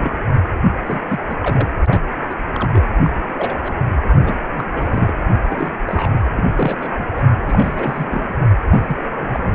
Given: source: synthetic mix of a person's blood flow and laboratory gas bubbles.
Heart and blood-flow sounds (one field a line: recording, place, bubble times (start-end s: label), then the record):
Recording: Doppler ultrasound of blood flow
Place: precordium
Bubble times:
0.00-0.23 s: bubbles
0.86-1.01 s: bubbles
1.08-1.20 s: bubbles
1.30-1.37 s: bubbles
1.42-1.68 s: bubbles
1.86-2.03 s: bubbles
2.29-2.35 s: bubbles
2.54-2.81 s: bubbles
3.03-3.10 s: bubbles
3.37-3.73 s: bubbles
4.10-4.35 s: bubbles
4.56-4.66 s: bubbles
4.73-5.12 s: bubbles
5.49-5.72 s: bubbles
5.87-6.25 s: bubbles
6.36-6.44 s: bubbles
6.56-6.89 s: bubbles
6.93-7.08 s: bubbles
7.16-7.25 s: bubbles
7.47-8.38 s: bubbles
8.71-9.05 s: bubbles
9.16-9.53 s: bubbles
From the record:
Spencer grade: 3 (all of the cardiac periods contain showers or single bubble signals, but not dominating or overriding the cardiac motion signals)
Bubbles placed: anywhere in the cardiac cycle